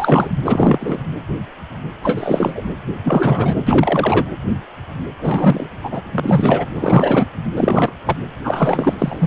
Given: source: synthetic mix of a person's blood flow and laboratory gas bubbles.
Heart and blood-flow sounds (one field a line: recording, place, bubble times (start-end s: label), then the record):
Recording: Doppler ultrasound of blood flow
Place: precordium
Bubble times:
0.00-0.29 s: bubbles
0.45-0.97 s: bubbles
2.03-2.62 s: bubbles
3.04-4.25 s: bubbles
5.22-5.67 s: bubbles
5.83-6.02 s: bubbles
6.11-6.65 s: bubbles
6.75-7.27 s: bubbles
7.56-7.92 s: bubbles
8.06-8.16 s: bubbles
8.43-8.94 s: bubbles
8.98-9.27 s: bubbles
From the record:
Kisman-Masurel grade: 333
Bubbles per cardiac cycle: rolling drumbeat, 9 or more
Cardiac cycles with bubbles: 50 to 99%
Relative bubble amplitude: loud (0.450 to 0.775)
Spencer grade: 3 (all of the cardiac periods contain showers or single bubble signals, but not dominating or overriding the cardiac motion signals)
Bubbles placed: anywhere in the cardiac cycle